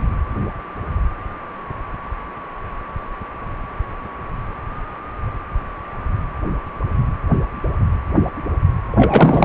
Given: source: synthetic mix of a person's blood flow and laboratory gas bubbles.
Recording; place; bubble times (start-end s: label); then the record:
Doppler ultrasound of blood flow; precordium
8.92-9.45 s: bubbles
From the record:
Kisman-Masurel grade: 213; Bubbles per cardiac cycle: several, 3 to 8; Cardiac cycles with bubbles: 1 to 10%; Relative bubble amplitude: loud (0.450 to 0.775); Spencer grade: 1 (occasional bubble signal discernible with the cardiac motion signal, with majority of cardiac periods free of bubbles); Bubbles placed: anywhere in the cardiac cycle